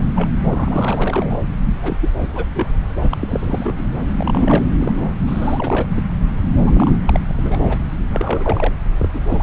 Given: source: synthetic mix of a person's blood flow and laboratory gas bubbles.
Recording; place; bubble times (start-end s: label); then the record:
Doppler ultrasound of blood flow; subclavian vein
0.00-0.11 s: bubbles
0.14-0.30 s: bubbles
0.47-1.38 s: bubbles
1.82-1.96 s: bubbles
2.01-2.10 s: bubbles
2.16-2.28 s: bubbles
2.33-2.44 s: bubbles
2.54-2.67 s: bubbles
3.02-3.08 s: bubbles
3.11-3.17 s: bubbles
3.21-3.85 s: bubbles
4.14-4.64 s: bubbles
4.79-5.08 s: bubbles
5.18-5.87 s: bubbles
5.96-6.03 s: bubbles
6.63-6.93 s: bubbles
7.05-7.20 s: bubbles
7.28-7.76 s: bubbles
8.12-8.73 s: bubbles
8.99-9.09 s: bubbles
9.13-9.21 s: bubbles
9.29-9.43 s: bubbles
From the record:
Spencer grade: 3 (all of the cardiac periods contain showers or single bubble signals, but not dominating or overriding the cardiac motion signals); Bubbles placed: anywhere in the cardiac cycle